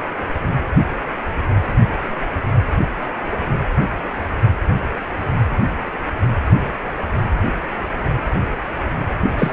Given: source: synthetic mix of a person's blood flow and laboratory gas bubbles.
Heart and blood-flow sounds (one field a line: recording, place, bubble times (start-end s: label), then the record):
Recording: Doppler ultrasound of blood flow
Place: precordium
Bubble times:
9.38-9.53 s: bubbles
From the record:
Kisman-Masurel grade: 212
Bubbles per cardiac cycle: several, 3 to 8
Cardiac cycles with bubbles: 1 to 10%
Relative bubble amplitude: moderate (0.250 to 0.450)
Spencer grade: 1 (occasional bubble signal discernible with the cardiac motion signal, with majority of cardiac periods free of bubbles)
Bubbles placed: anywhere in the cardiac cycle